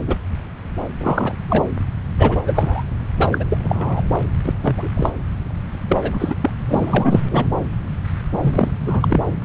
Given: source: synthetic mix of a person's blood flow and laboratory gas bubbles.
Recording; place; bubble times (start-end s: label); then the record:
Doppler ultrasound of blood flow; subclavian vein
0.07-0.17 s: bubbles
0.98-1.35 s: bubbles
1.48-1.64 s: bubbles
2.18-2.37 s: bubbles
2.46-2.84 s: bubbles
3.17-3.45 s: bubbles
3.50-3.58 s: bubbles
3.62-4.02 s: bubbles
4.23-4.25 s: bubbles
4.43-4.54 s: bubbles
4.62-4.90 s: bubbles
4.96-5.09 s: bubbles
5.88-6.35 s: bubbles
6.41-6.50 s: bubbles
6.66-7.21 s: bubbles
7.29-7.50 s: bubbles
8.32-8.38 s: bubbles
8.40-8.71 s: bubbles
8.87-9.21 s: bubbles
From the record:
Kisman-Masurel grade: 233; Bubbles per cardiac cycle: several, 3 to 8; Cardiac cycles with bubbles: 50 to 99%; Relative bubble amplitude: loud (0.450 to 0.775); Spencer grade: 3 (all of the cardiac periods contain showers or single bubble signals, but not dominating or overriding the cardiac motion signals); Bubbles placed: anywhere in the cardiac cycle